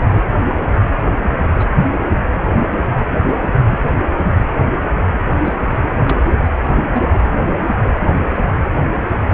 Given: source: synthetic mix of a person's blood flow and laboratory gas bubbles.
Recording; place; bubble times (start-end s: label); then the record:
Doppler ultrasound of blood flow; precordium
0.10-0.20 s: bubbles
1.58-1.68 s: bubbles
3.70-3.79 s: bubbles
5.25-5.34 s: bubbles
5.44-5.53 s: bubbles
6.09-6.16 s: bubbles
6.42-6.49 s: bubbles
6.92-7.08 s: bubbles
From the record:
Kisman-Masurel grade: 122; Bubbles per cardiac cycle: 1 to 2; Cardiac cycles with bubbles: 10 to 50%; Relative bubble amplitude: moderate (0.250 to 0.450); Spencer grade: 2 (many but less than half of the cardiac periods contain bubble signals, singularly or in groups); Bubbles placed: anywhere in the cardiac cycle